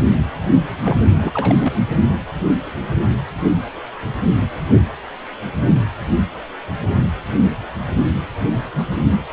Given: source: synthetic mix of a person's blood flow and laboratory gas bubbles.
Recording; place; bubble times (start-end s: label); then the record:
Doppler ultrasound of blood flow; precordium
0.84-1.11 s: bubbles
1.20-1.56 s: bubbles
1.59-1.83 s: bubbles
From the record:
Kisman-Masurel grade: 222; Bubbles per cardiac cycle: several, 3 to 8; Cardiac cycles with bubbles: 10 to 50%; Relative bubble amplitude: moderate (0.250 to 0.450); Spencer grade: 2 (many but less than half of the cardiac periods contain bubble signals, singularly or in groups); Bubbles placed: anywhere in the cardiac cycle